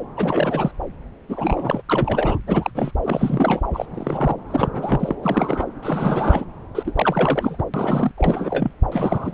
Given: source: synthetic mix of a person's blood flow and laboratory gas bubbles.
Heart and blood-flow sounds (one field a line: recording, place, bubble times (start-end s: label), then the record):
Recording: Doppler ultrasound of blood flow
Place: subclavian vein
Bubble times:
0.16-0.72 s: bubbles
1.29-1.82 s: bubbles
1.89-2.38 s: bubbles
2.46-2.70 s: bubbles
2.74-2.92 s: bubbles
3.03-3.60 s: bubbles
3.73-3.85 s: bubbles
3.94-4.35 s: bubbles
4.50-4.69 s: bubbles
4.72-5.16 s: bubbles
5.22-5.66 s: bubbles
5.83-6.46 s: bubbles
6.75-7.63 s: bubbles
7.73-8.12 s: bubbles
8.18-8.71 s: bubbles
8.91-9.34 s: bubbles
From the record:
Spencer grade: 3 (all of the cardiac periods contain showers or single bubble signals, but not dominating or overriding the cardiac motion signals)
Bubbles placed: anywhere in the cardiac cycle